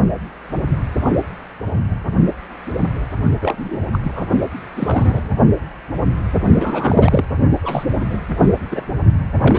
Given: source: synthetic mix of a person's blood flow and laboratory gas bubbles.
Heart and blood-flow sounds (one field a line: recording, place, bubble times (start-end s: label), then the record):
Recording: Doppler ultrasound of blood flow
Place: precordium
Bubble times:
3.40-3.77 s: bubbles
3.92-4.28 s: bubbles
4.76-5.35 s: bubbles
6.59-7.25 s: bubbles
7.63-7.85 s: bubbles
8.00-8.05 s: bubbles
8.10-8.20 s: bubbles
8.71-8.83 s: bubbles
9.42-9.59 s: bubbles
From the record:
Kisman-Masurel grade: 222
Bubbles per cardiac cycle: several, 3 to 8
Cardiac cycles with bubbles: 10 to 50%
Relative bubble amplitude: moderate (0.250 to 0.450)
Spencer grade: 2 (many but less than half of the cardiac periods contain bubble signals, singularly or in groups)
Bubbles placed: only in the low amplitude regions of the cardiac cycle